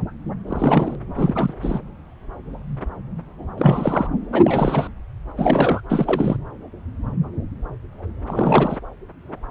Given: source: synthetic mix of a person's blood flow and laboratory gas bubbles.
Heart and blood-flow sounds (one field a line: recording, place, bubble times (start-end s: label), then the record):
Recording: Doppler ultrasound of blood flow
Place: subclavian vein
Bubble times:
0.47-0.95 s: bubbles
1.16-1.54 s: bubbles
1.61-1.80 s: bubbles
3.58-4.08 s: bubbles
4.31-4.88 s: bubbles
5.36-5.81 s: bubbles
5.89-6.36 s: bubbles
8.26-8.77 s: bubbles
From the record:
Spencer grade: 3 (all of the cardiac periods contain showers or single bubble signals, but not dominating or overriding the cardiac motion signals)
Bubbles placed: anywhere in the cardiac cycle